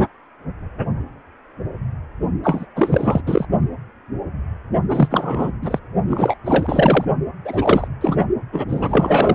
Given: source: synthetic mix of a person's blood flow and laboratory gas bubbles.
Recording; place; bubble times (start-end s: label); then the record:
Doppler ultrasound of blood flow; precordium
2.43-2.65 s: bubbles
2.75-3.20 s: bubbles
3.26-3.45 s: bubbles
4.88-5.51 s: bubbles
5.62-5.79 s: bubbles
6.07-6.37 s: bubbles
6.44-7.05 s: bubbles
7.45-7.88 s: bubbles
8.00-8.26 s: bubbles
8.52-8.64 s: bubbles
8.68-9.35 s: bubbles
From the record:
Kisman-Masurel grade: 333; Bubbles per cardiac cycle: rolling drumbeat, 9 or more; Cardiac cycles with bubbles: 50 to 99%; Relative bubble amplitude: loud (0.450 to 0.775); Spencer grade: 3 (all of the cardiac periods contain showers or single bubble signals, but not dominating or overriding the cardiac motion signals); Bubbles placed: only in the low amplitude regions of the cardiac cycle